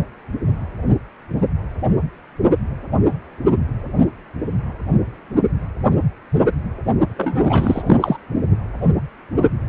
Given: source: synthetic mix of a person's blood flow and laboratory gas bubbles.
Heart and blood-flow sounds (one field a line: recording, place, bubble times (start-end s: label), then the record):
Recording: Doppler ultrasound of blood flow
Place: precordium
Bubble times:
7.17-7.83 s: bubbles
7.86-8.17 s: bubbles
From the record:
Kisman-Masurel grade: 213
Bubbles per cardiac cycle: several, 3 to 8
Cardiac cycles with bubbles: 1 to 10%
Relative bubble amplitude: loud (0.450 to 0.775)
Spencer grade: 1 (occasional bubble signal discernible with the cardiac motion signal, with majority of cardiac periods free of bubbles)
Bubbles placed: only in the low amplitude regions of the cardiac cycle